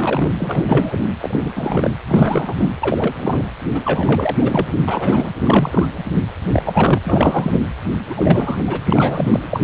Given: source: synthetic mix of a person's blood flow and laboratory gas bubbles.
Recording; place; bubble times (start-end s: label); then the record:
Doppler ultrasound of blood flow; precordium
0.00-0.33 s: bubbles
0.39-1.13 s: bubbles
1.21-1.39 s: bubbles
1.42-1.52 s: bubbles
1.56-1.96 s: bubbles
2.08-2.54 s: bubbles
2.57-2.69 s: bubbles
2.81-3.14 s: bubbles
3.19-3.44 s: bubbles
3.73-3.81 s: bubbles
3.84-4.67 s: bubbles
4.88-5.30 s: bubbles
5.42-5.86 s: bubbles
6.42-6.99 s: bubbles
7.04-7.59 s: bubbles
8.10-8.64 s: bubbles
8.68-8.81 s: bubbles
8.85-9.39 s: bubbles
9.49-9.64 s: bubbles
From the record:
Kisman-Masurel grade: 343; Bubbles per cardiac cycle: rolling drumbeat, 9 or more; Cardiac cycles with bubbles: 100%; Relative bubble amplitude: loud (0.450 to 0.775); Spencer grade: 3 (all of the cardiac periods contain showers or single bubble signals, but not dominating or overriding the cardiac motion signals); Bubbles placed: anywhere in the cardiac cycle